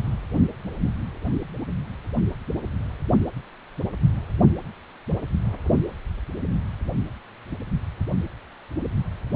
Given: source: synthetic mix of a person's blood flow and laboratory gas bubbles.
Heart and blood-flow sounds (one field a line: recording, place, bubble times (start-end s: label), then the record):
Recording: Doppler ultrasound of blood flow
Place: precordium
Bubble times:
no bubbles
From the record:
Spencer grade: 0 (complete lack of bubble signals)